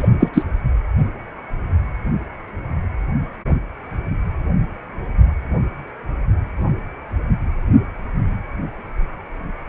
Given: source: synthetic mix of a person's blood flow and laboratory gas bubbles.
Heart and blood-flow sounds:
Doppler ultrasound of blood flow; precordium
0.00-0.09 s: bubbles
0.20-0.29 s: bubbles
0.33-0.43 s: bubbles
From the record:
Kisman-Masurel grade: 213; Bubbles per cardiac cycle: several, 3 to 8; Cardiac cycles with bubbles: 1 to 10%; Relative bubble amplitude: loud (0.450 to 0.775); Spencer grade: 1 (occasional bubble signal discernible with the cardiac motion signal, with majority of cardiac periods free of bubbles); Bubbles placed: anywhere in the cardiac cycle

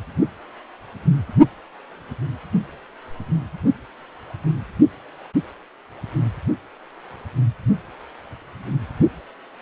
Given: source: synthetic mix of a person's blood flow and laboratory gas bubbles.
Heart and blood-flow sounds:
Doppler ultrasound of blood flow; precordium
no bubbles
From the record:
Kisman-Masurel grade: 000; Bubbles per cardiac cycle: 0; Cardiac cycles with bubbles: 0%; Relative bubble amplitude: no bubbles discernible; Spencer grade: 0 (complete lack of bubble signals)

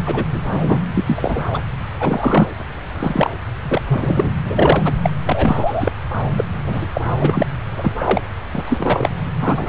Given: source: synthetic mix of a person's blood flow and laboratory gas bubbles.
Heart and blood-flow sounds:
Doppler ultrasound of blood flow; subclavian vein
0.05-0.25 s: bubbles
0.31-0.79 s: bubbles
0.95-1.61 s: bubbles
2.00-2.47 s: bubbles
2.94-3.30 s: bubbles
3.65-3.81 s: bubbles
3.88-4.31 s: bubbles
4.43-4.93 s: bubbles
5.02-5.10 s: bubbles
5.25-5.92 s: bubbles
6.37-6.45 s: bubbles
6.66-6.87 s: bubbles
6.94-7.01 s: bubbles
7.20-7.43 s: bubbles
7.78-7.92 s: bubbles
7.99-8.21 s: bubbles
8.53-9.11 s: bubbles
9.41-9.67 s: bubbles
From the record:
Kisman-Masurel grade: 243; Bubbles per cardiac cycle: several, 3 to 8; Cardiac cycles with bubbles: 100%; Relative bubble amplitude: loud (0.450 to 0.775); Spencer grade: 3 (all of the cardiac periods contain showers or single bubble signals, but not dominating or overriding the cardiac motion signals); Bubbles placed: anywhere in the cardiac cycle

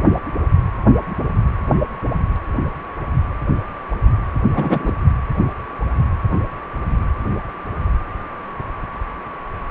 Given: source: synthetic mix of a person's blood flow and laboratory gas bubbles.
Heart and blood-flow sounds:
Doppler ultrasound of blood flow; precordium
4.55-4.92 s: bubbles
From the record:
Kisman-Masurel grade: 213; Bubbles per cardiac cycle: several, 3 to 8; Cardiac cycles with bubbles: 1 to 10%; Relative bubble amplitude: loud (0.450 to 0.775); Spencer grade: 1 (occasional bubble signal discernible with the cardiac motion signal, with majority of cardiac periods free of bubbles); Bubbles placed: anywhere in the cardiac cycle

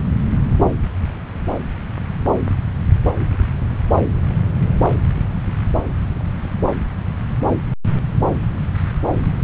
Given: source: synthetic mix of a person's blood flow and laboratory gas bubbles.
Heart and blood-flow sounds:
Doppler ultrasound of blood flow; subclavian vein
no bubbles
From the record:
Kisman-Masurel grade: 000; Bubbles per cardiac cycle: 0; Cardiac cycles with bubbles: 0%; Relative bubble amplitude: no bubbles discernible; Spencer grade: 0 (complete lack of bubble signals)

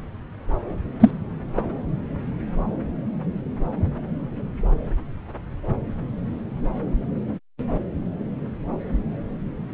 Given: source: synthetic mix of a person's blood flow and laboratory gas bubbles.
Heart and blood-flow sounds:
Doppler ultrasound of blood flow; subclavian vein
1.00-1.10 s: bubbles
1.57-1.61 s: bubbles
From the record:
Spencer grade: 2 (many but less than half of the cardiac periods contain bubble signals, singularly or in groups); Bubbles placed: anywhere in the cardiac cycle

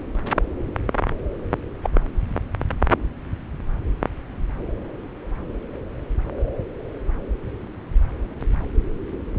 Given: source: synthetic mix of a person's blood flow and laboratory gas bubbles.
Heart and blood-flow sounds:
Doppler ultrasound of blood flow; subclavian vein
1.83-1.90 s: bubbles
From the record:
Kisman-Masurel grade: 112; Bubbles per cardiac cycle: 1 to 2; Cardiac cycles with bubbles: 1 to 10%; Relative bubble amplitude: moderate (0.250 to 0.450); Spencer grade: 1 (occasional bubble signal discernible with the cardiac motion signal, with majority of cardiac periods free of bubbles); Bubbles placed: anywhere in the cardiac cycle

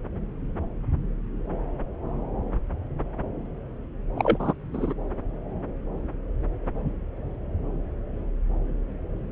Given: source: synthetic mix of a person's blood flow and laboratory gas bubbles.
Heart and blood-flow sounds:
Doppler ultrasound of blood flow; subclavian vein
4.16-4.53 s: bubbles
4.72-4.93 s: bubbles
From the record:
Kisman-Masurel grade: 212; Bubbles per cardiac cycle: several, 3 to 8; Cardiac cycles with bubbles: 1 to 10%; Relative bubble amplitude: moderate (0.250 to 0.450); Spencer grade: 1 (occasional bubble signal discernible with the cardiac motion signal, with majority of cardiac periods free of bubbles); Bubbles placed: anywhere in the cardiac cycle

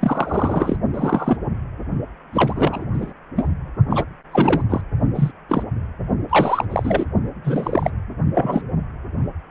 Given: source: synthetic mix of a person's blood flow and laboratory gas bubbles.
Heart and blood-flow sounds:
Doppler ultrasound of blood flow; precordium
0.00-0.77 s: bubbles
0.93-1.38 s: bubbles
2.33-2.85 s: bubbles
2.94-3.13 s: bubbles
3.35-3.48 s: bubbles
3.89-4.04 s: bubbles
4.31-4.62 s: bubbles
4.70-4.81 s: bubbles
5.15-5.31 s: bubbles
5.48-5.63 s: bubbles
6.29-6.66 s: bubbles
6.70-7.04 s: bubbles
7.44-7.90 s: bubbles
8.34-8.62 s: bubbles
From the record:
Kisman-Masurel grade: 233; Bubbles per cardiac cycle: several, 3 to 8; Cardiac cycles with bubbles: 50 to 99%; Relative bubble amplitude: loud (0.450 to 0.775); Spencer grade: 3 (all of the cardiac periods contain showers or single bubble signals, but not dominating or overriding the cardiac motion signals); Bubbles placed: only in the low amplitude regions of the cardiac cycle

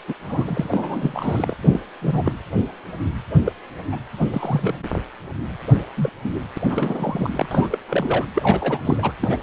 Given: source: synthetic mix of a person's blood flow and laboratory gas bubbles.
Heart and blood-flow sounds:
Doppler ultrasound of blood flow; precordium
0.07-0.14 s: bubbles
0.27-0.69 s: bubbles
0.71-1.56 s: bubbles
1.61-1.68 s: bubbles
1.71-1.80 s: bubbles
2.02-2.33 s: bubbles
3.46-3.52 s: bubbles
3.92-3.97 s: bubbles
4.17-4.26 s: bubbles
4.33-4.77 s: bubbles
5.96-6.09 s: bubbles
6.23-6.39 s: bubbles
6.54-6.57 s: bubbles
6.69-7.46 s: bubbles
7.51-7.78 s: bubbles
7.88-8.26 s: bubbles
8.35-9.12 s: bubbles
9.21-9.38 s: bubbles
From the record:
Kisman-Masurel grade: 232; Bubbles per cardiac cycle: several, 3 to 8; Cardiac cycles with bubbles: 50 to 99%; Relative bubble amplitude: moderate (0.250 to 0.450); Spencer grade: 3 (all of the cardiac periods contain showers or single bubble signals, but not dominating or overriding the cardiac motion signals); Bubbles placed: anywhere in the cardiac cycle

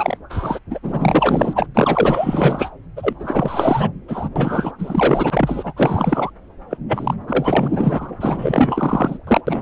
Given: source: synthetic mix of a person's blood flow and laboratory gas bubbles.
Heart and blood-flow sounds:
Doppler ultrasound of blood flow; subclavian vein
0.00-0.17 s: bubbles
0.29-0.59 s: bubbles
0.69-0.79 s: bubbles
0.82-1.67 s: bubbles
1.74-2.70 s: bubbles
2.96-3.14 s: bubbles
3.19-3.90 s: bubbles
4.08-4.29 s: bubbles
4.36-4.72 s: bubbles
4.78-5.74 s: bubbles
5.77-6.31 s: bubbles
6.70-6.78 s: bubbles
6.88-7.14 s: bubbles
7.28-8.12 s: bubbles
8.20-9.18 s: bubbles
9.27-9.40 s: bubbles
9.47-9.62 s: bubbles
From the record:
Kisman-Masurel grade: 444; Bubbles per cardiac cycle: continuous sound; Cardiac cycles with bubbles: 100%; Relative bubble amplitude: maximal (0.775 to 0.999); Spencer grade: 4 (maximum detectable bubble signal sounding continuously throughout systole and diastole of every cardiac period, and overriding the amplitude of the normal cardiac signals); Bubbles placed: anywhere in the cardiac cycle

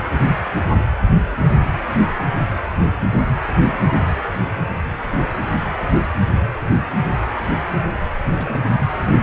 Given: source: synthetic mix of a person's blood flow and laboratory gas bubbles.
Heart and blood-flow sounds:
Doppler ultrasound of blood flow; precordium
1.38-1.45 s: bubbles
1.55-1.70 s: bubbles
8.25-8.62 s: bubbles
From the record:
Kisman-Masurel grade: 221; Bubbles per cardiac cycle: several, 3 to 8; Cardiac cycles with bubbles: 10 to 50%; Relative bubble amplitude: barely perceptible (0.100 to 0.250); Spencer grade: 2 (many but less than half of the cardiac periods contain bubble signals, singularly or in groups); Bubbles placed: anywhere in the cardiac cycle

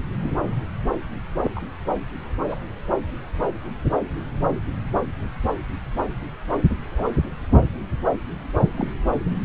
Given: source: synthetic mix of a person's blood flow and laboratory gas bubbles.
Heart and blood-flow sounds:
Doppler ultrasound of blood flow; subclavian vein
1.43-1.51 s: bubbles
1.55-1.61 s: bubbles
2.47-2.56 s: bubbles
6.96-7.04 s: bubbles
8.77-8.90 s: bubbles
From the record:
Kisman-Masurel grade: 121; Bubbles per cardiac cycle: 1 to 2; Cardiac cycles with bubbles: 10 to 50%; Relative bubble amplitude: barely perceptible (0.100 to 0.250); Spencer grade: 2 (many but less than half of the cardiac periods contain bubble signals, singularly or in groups); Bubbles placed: anywhere in the cardiac cycle

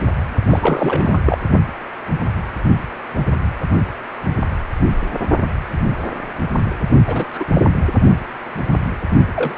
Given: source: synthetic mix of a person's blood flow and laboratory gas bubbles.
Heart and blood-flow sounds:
Doppler ultrasound of blood flow; precordium
0.50-1.22 s: bubbles
1.25-1.38 s: bubbles
7.07-7.45 s: bubbles
7.53-7.61 s: bubbles
9.36-9.58 s: bubbles
From the record:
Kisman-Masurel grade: 222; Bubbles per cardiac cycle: several, 3 to 8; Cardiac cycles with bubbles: 10 to 50%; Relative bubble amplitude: moderate (0.250 to 0.450); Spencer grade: 2 (many but less than half of the cardiac periods contain bubble signals, singularly or in groups); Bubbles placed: only in the low amplitude regions of the cardiac cycle

